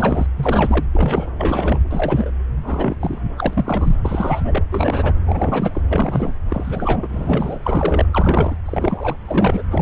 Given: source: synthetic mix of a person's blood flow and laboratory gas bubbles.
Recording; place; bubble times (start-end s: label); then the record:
Doppler ultrasound of blood flow; subclavian vein
0.00-0.27 s: bubbles
0.36-0.85 s: bubbles
0.92-1.29 s: bubbles
1.38-1.79 s: bubbles
1.90-2.31 s: bubbles
2.63-2.96 s: bubbles
3.00-3.21 s: bubbles
3.38-3.97 s: bubbles
4.04-4.62 s: bubbles
4.71-5.12 s: bubbles
5.25-5.82 s: bubbles
5.88-6.33 s: bubbles
6.49-8.06 s: bubbles
8.12-8.57 s: bubbles
8.65-9.17 s: bubbles
9.25-9.64 s: bubbles
9.70-9.82 s: bubbles
From the record:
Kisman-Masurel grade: 343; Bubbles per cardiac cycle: rolling drumbeat, 9 or more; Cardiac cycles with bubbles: 100%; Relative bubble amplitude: loud (0.450 to 0.775); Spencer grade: 3 (all of the cardiac periods contain showers or single bubble signals, but not dominating or overriding the cardiac motion signals); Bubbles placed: anywhere in the cardiac cycle